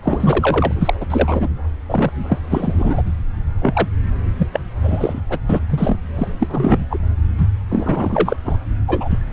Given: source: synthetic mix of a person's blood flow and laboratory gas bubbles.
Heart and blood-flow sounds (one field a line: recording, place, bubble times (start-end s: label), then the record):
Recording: Doppler ultrasound of blood flow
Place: subclavian vein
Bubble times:
0.00-0.72 s: bubbles
0.81-0.94 s: bubbles
1.00-1.06 s: bubbles
1.09-1.48 s: bubbles
1.89-2.10 s: bubbles
2.29-2.38 s: bubbles
2.50-3.02 s: bubbles
3.61-3.88 s: bubbles
4.38-4.47 s: bubbles
4.53-4.60 s: bubbles
4.83-5.21 s: bubbles
5.29-5.39 s: bubbles
5.49-5.59 s: bubbles
5.70-5.96 s: bubbles
6.16-6.28 s: bubbles
6.39-6.87 s: bubbles
6.90-6.98 s: bubbles
7.38-7.47 s: bubbles
7.70-8.37 s: bubbles
8.45-8.56 s: bubbles
8.87-9.19 s: bubbles
From the record:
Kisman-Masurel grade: 343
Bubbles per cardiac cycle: rolling drumbeat, 9 or more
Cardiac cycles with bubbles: 100%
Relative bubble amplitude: loud (0.450 to 0.775)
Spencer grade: 3 (all of the cardiac periods contain showers or single bubble signals, but not dominating or overriding the cardiac motion signals)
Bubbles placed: anywhere in the cardiac cycle